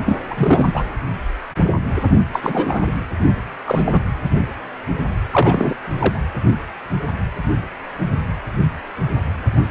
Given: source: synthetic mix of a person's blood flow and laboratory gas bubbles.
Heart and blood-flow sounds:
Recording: Doppler ultrasound of blood flow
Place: precordium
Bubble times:
0.06-0.19 s: bubbles
0.30-0.84 s: bubbles
2.33-2.40 s: bubbles
2.43-2.92 s: bubbles
3.65-4.01 s: bubbles
5.33-5.76 s: bubbles
5.97-6.23 s: bubbles
From the record:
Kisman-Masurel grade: 233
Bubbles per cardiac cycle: several, 3 to 8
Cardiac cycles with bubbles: 50 to 99%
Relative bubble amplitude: loud (0.450 to 0.775)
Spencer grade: 3 (all of the cardiac periods contain showers or single bubble signals, but not dominating or overriding the cardiac motion signals)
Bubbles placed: anywhere in the cardiac cycle

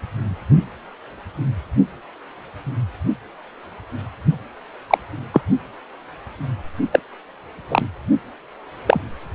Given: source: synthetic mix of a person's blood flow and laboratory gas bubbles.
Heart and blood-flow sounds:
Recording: Doppler ultrasound of blood flow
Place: precordium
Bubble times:
4.90-4.98 s: bubbles
5.33-5.41 s: bubbles
6.92-7.00 s: bubbles
7.70-7.86 s: bubbles
8.87-9.00 s: bubbles
From the record:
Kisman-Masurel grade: 123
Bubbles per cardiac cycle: 1 to 2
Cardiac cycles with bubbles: 10 to 50%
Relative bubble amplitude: loud (0.450 to 0.775)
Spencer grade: 2 (many but less than half of the cardiac periods contain bubble signals, singularly or in groups)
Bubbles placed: only in the low amplitude regions of the cardiac cycle

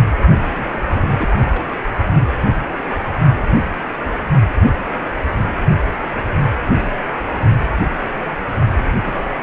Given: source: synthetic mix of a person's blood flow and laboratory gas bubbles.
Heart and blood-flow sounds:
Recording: Doppler ultrasound of blood flow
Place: precordium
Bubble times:
0.53-1.10 s: bubbles
1.17-1.64 s: bubbles
8.72-9.29 s: bubbles
From the record:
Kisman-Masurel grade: 221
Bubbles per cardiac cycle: several, 3 to 8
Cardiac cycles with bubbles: 10 to 50%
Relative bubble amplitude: barely perceptible (0.100 to 0.250)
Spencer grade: 2 (many but less than half of the cardiac periods contain bubble signals, singularly or in groups)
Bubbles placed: only in the low amplitude regions of the cardiac cycle

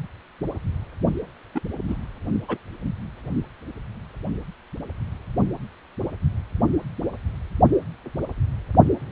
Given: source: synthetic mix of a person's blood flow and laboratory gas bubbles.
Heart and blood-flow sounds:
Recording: Doppler ultrasound of blood flow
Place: precordium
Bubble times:
1.55-1.60 s: bubbles
1.88-1.96 s: bubbles
2.48-2.57 s: bubbles
From the record:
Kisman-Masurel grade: 121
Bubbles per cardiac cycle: 1 to 2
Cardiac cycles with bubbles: 10 to 50%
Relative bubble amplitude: barely perceptible (0.100 to 0.250)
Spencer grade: 2 (many but less than half of the cardiac periods contain bubble signals, singularly or in groups)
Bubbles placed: only in the low amplitude regions of the cardiac cycle

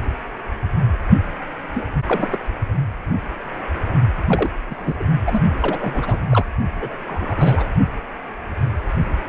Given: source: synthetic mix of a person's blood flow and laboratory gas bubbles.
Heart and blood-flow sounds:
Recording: Doppler ultrasound of blood flow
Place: precordium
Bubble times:
1.75-1.85 s: bubbles
2.06-2.39 s: bubbles
4.27-4.48 s: bubbles
4.69-5.04 s: bubbles
5.26-5.40 s: bubbles
5.62-5.77 s: bubbles
5.79-6.20 s: bubbles
6.29-6.47 s: bubbles
6.79-6.97 s: bubbles
7.05-7.69 s: bubbles
From the record:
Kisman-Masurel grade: 232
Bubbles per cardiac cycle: several, 3 to 8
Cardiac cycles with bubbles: 50 to 99%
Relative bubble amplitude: moderate (0.250 to 0.450)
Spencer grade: 3 (all of the cardiac periods contain showers or single bubble signals, but not dominating or overriding the cardiac motion signals)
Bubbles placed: only in the low amplitude regions of the cardiac cycle

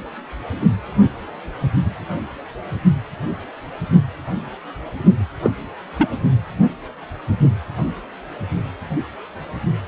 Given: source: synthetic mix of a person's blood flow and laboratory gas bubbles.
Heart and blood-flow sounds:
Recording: Doppler ultrasound of blood flow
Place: precordium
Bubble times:
5.43-5.50 s: bubbles
5.98-6.08 s: bubbles
From the record:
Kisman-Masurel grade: 113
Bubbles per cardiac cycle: 1 to 2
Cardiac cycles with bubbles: 1 to 10%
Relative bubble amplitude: loud (0.450 to 0.775)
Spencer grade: 1 (occasional bubble signal discernible with the cardiac motion signal, with majority of cardiac periods free of bubbles)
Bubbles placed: anywhere in the cardiac cycle

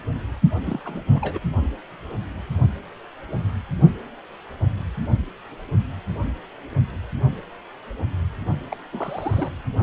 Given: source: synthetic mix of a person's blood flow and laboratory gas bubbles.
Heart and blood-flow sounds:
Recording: Doppler ultrasound of blood flow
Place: precordium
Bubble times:
0.65-0.80 s: bubbles
0.85-1.04 s: bubbles
1.12-1.40 s: bubbles
8.70-8.77 s: bubbles
8.92-9.51 s: bubbles
9.77-9.83 s: bubbles
From the record:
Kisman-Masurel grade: 221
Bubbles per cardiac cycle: several, 3 to 8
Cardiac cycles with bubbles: 10 to 50%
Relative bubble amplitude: barely perceptible (0.100 to 0.250)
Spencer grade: 2 (many but less than half of the cardiac periods contain bubble signals, singularly or in groups)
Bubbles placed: anywhere in the cardiac cycle

